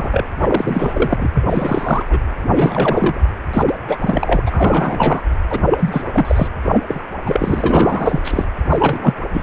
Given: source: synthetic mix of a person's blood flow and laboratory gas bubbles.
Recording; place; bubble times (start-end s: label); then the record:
Doppler ultrasound of blood flow; precordium
0.00-0.25 s: bubbles
0.39-1.28 s: bubbles
1.34-2.05 s: bubbles
2.09-2.20 s: bubbles
2.52-3.21 s: bubbles
3.53-3.63 s: bubbles
3.66-3.75 s: bubbles
3.88-3.98 s: bubbles
4.00-4.42 s: bubbles
4.46-5.23 s: bubbles
5.50-5.61 s: bubbles
5.71-6.03 s: bubbles
6.13-6.48 s: bubbles
6.65-6.83 s: bubbles
6.87-7.00 s: bubbles
7.25-8.21 s: bubbles
8.24-8.46 s: bubbles
8.70-9.14 s: bubbles
9.33-9.43 s: bubbles
From the record:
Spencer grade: 3 (all of the cardiac periods contain showers or single bubble signals, but not dominating or overriding the cardiac motion signals); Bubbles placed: anywhere in the cardiac cycle